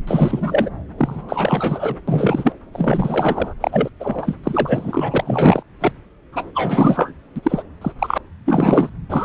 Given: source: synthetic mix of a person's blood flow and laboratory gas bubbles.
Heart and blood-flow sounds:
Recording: Doppler ultrasound of blood flow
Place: subclavian vein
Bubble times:
0.07-0.69 s: bubbles
0.98-1.22 s: bubbles
1.28-1.97 s: bubbles
2.08-2.53 s: bubbles
2.73-3.54 s: bubbles
3.60-3.89 s: bubbles
4.00-4.35 s: bubbles
4.43-5.63 s: bubbles
5.81-5.92 s: bubbles
6.32-6.50 s: bubbles
6.55-7.12 s: bubbles
7.36-7.40 s: bubbles
7.43-7.62 s: bubbles
7.81-7.92 s: bubbles
7.98-8.18 s: bubbles
8.46-8.89 s: bubbles
9.09-9.25 s: bubbles
From the record:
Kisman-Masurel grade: 342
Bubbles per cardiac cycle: rolling drumbeat, 9 or more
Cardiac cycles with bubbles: 100%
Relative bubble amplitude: moderate (0.250 to 0.450)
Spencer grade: 3 (all of the cardiac periods contain showers or single bubble signals, but not dominating or overriding the cardiac motion signals)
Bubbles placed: anywhere in the cardiac cycle

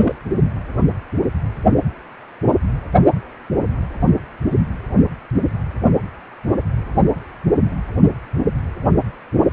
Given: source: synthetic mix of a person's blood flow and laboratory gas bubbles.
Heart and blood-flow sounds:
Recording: Doppler ultrasound of blood flow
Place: precordium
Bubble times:
0.00-0.15 s: bubbles
From the record:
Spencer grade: 1 (occasional bubble signal discernible with the cardiac motion signal, with majority of cardiac periods free of bubbles)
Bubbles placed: only in the low amplitude regions of the cardiac cycle

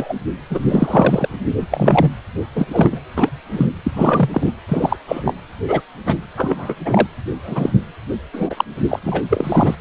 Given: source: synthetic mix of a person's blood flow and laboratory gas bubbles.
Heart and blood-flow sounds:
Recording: Doppler ultrasound of blood flow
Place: precordium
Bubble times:
0.00-0.14 s: bubbles
0.49-0.58 s: bubbles
0.69-1.27 s: bubbles
1.71-2.10 s: bubbles
2.55-2.67 s: bubbles
2.73-3.01 s: bubbles
3.16-3.29 s: bubbles
3.52-3.67 s: bubbles
3.84-3.91 s: bubbles
3.96-4.53 s: bubbles
4.68-4.96 s: bubbles
5.07-5.33 s: bubbles
5.67-5.81 s: bubbles
6.05-6.18 s: bubbles
6.36-6.75 s: bubbles
6.84-7.07 s: bubbles
7.43-7.71 s: bubbles
8.33-8.64 s: bubbles
8.88-8.99 s: bubbles
9.03-9.23 s: bubbles
9.29-9.76 s: bubbles
From the record:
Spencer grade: 3 (all of the cardiac periods contain showers or single bubble signals, but not dominating or overriding the cardiac motion signals)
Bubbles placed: anywhere in the cardiac cycle

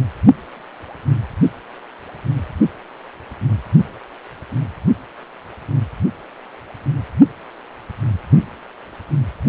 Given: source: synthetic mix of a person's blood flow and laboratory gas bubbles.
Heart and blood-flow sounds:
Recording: Doppler ultrasound of blood flow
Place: precordium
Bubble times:
no bubbles
From the record:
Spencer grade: 0 (complete lack of bubble signals)

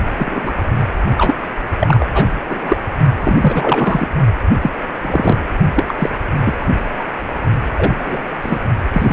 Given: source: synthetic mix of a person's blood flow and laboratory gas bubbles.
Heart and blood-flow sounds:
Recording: Doppler ultrasound of blood flow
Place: precordium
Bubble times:
0.18-0.52 s: bubbles
1.17-1.34 s: bubbles
1.80-2.05 s: bubbles
2.13-2.25 s: bubbles
2.48-2.77 s: bubbles
3.19-4.08 s: bubbles
4.62-4.71 s: bubbles
5.02-5.38 s: bubbles
5.75-5.84 s: bubbles
5.87-5.94 s: bubbles
5.99-6.10 s: bubbles
6.44-6.67 s: bubbles
6.95-7.04 s: bubbles
7.78-8.22 s: bubbles
8.42-8.59 s: bubbles
8.92-9.13 s: bubbles
From the record:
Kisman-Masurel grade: 243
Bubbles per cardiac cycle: several, 3 to 8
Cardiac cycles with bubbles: 100%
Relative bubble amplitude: loud (0.450 to 0.775)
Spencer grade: 3 (all of the cardiac periods contain showers or single bubble signals, but not dominating or overriding the cardiac motion signals)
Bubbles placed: only in the low amplitude regions of the cardiac cycle

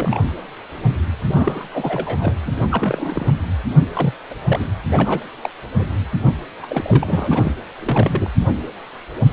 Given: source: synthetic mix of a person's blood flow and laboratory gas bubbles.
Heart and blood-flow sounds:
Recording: Doppler ultrasound of blood flow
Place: precordium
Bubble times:
0.00-0.34 s: bubbles
1.28-1.67 s: bubbles
1.73-2.34 s: bubbles
2.45-2.52 s: bubbles
2.71-3.34 s: bubbles
3.93-4.14 s: bubbles
4.29-4.34 s: bubbles
4.44-4.67 s: bubbles
4.90-5.24 s: bubbles
5.42-5.50 s: bubbles
5.78-5.84 s: bubbles
6.62-7.54 s: bubbles
7.79-8.30 s: bubbles
From the record:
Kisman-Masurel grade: 232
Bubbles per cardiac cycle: several, 3 to 8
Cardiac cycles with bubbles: 50 to 99%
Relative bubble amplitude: moderate (0.250 to 0.450)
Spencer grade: 3 (all of the cardiac periods contain showers or single bubble signals, but not dominating or overriding the cardiac motion signals)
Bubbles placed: anywhere in the cardiac cycle

